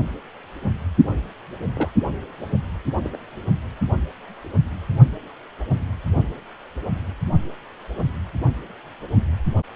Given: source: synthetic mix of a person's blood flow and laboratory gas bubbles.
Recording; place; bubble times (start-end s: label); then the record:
Doppler ultrasound of blood flow; precordium
1.75-1.89 s: bubbles
3.02-3.10 s: bubbles
3.12-3.17 s: bubbles
From the record:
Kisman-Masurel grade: 121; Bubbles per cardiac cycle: 1 to 2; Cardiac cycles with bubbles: 10 to 50%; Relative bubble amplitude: barely perceptible (0.100 to 0.250); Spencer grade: 2 (many but less than half of the cardiac periods contain bubble signals, singularly or in groups); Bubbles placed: only in the low amplitude regions of the cardiac cycle